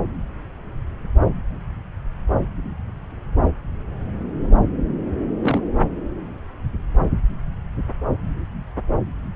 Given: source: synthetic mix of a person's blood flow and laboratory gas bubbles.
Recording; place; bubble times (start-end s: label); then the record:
Doppler ultrasound of blood flow; subclavian vein
5.42-5.60 s: bubbles
From the record:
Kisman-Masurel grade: 112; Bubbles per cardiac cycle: 1 to 2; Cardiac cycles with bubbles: 1 to 10%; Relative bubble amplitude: moderate (0.250 to 0.450); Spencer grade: 1 (occasional bubble signal discernible with the cardiac motion signal, with majority of cardiac periods free of bubbles); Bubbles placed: anywhere in the cardiac cycle